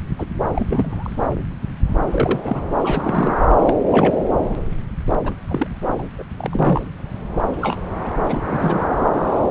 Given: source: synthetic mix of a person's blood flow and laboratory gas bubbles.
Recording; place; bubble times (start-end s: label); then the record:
Doppler ultrasound of blood flow; subclavian vein
0.18-0.26 s: bubbles
0.54-0.66 s: bubbles
0.69-1.26 s: bubbles
2.11-2.40 s: bubbles
2.43-2.70 s: bubbles
2.83-3.42 s: bubbles
3.65-3.77 s: bubbles
3.92-4.14 s: bubbles
5.24-5.31 s: bubbles
5.48-5.67 s: bubbles
5.99-6.03 s: bubbles
6.19-6.23 s: bubbles
6.37-6.90 s: bubbles
7.61-7.78 s: bubbles
8.04-8.09 s: bubbles
8.29-8.42 s: bubbles
8.49-8.85 s: bubbles
From the record:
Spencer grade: 3 (all of the cardiac periods contain showers or single bubble signals, but not dominating or overriding the cardiac motion signals); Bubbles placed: anywhere in the cardiac cycle